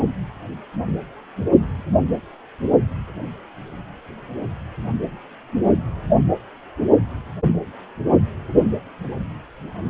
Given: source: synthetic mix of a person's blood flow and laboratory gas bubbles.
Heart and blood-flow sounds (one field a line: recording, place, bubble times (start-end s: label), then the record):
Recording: Doppler ultrasound of blood flow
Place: precordium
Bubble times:
no bubbles
From the record:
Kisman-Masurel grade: 000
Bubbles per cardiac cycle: 0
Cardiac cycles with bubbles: 0%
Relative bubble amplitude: no bubbles discernible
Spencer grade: 0 (complete lack of bubble signals)